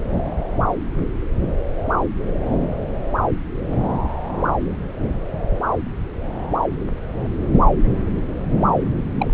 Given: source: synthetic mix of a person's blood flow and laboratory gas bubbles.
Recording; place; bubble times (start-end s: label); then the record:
Doppler ultrasound of blood flow; subclavian vein
9.18-9.30 s: bubbles
From the record:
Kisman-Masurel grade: 112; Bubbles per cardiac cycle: 1 to 2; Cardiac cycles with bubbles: 1 to 10%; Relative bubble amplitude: moderate (0.250 to 0.450); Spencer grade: 1 (occasional bubble signal discernible with the cardiac motion signal, with majority of cardiac periods free of bubbles); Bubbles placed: anywhere in the cardiac cycle